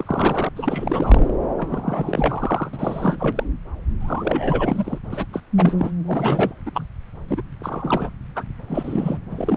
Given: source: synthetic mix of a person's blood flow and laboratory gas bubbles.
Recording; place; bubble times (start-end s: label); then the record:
Doppler ultrasound of blood flow; subclavian vein
0.00-0.49 s: bubbles
0.55-1.33 s: bubbles
1.58-2.71 s: bubbles
2.73-3.44 s: bubbles
4.00-4.99 s: bubbles
5.11-5.25 s: bubbles
5.33-5.41 s: bubbles
5.57-5.91 s: bubbles
6.06-6.53 s: bubbles
6.66-6.71 s: bubbles
6.74-6.87 s: bubbles
7.29-7.42 s: bubbles
7.60-8.10 s: bubbles
8.36-8.44 s: bubbles
8.68-9.19 s: bubbles
9.30-9.57 s: bubbles
From the record:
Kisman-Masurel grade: 342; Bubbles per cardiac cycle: rolling drumbeat, 9 or more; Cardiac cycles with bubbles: 100%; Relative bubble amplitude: moderate (0.250 to 0.450); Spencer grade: 3 (all of the cardiac periods contain showers or single bubble signals, but not dominating or overriding the cardiac motion signals); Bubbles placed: anywhere in the cardiac cycle